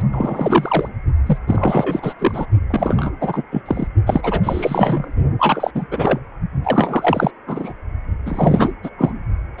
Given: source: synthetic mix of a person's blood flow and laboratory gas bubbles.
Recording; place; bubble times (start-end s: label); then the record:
Doppler ultrasound of blood flow; precordium
0.00-0.02 s: bubbles
0.11-0.89 s: bubbles
1.26-1.38 s: bubbles
1.47-2.13 s: bubbles
2.18-2.46 s: bubbles
2.68-3.12 s: bubbles
3.21-3.43 s: bubbles
3.51-3.62 s: bubbles
3.65-3.88 s: bubbles
4.06-5.12 s: bubbles
5.39-5.71 s: bubbles
5.75-5.86 s: bubbles
5.91-6.20 s: bubbles
6.63-7.31 s: bubbles
7.46-7.73 s: bubbles
8.26-8.72 s: bubbles
8.83-8.90 s: bubbles
8.97-9.13 s: bubbles
9.58-9.60 s: bubbles
From the record:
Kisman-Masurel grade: 333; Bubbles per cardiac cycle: rolling drumbeat, 9 or more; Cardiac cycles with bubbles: 50 to 99%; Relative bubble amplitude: loud (0.450 to 0.775); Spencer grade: 3 (all of the cardiac periods contain showers or single bubble signals, but not dominating or overriding the cardiac motion signals); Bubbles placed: only in the low amplitude regions of the cardiac cycle